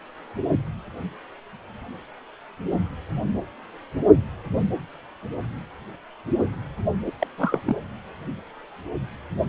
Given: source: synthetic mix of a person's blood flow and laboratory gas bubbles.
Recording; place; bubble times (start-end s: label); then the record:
Doppler ultrasound of blood flow; precordium
7.06-7.12 s: bubbles
7.19-7.27 s: bubbles
7.38-7.60 s: bubbles
7.66-7.77 s: bubbles
From the record:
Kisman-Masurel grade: 212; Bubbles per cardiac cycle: several, 3 to 8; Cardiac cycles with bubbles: 1 to 10%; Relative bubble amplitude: moderate (0.250 to 0.450); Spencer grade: 1 (occasional bubble signal discernible with the cardiac motion signal, with majority of cardiac periods free of bubbles); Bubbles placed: anywhere in the cardiac cycle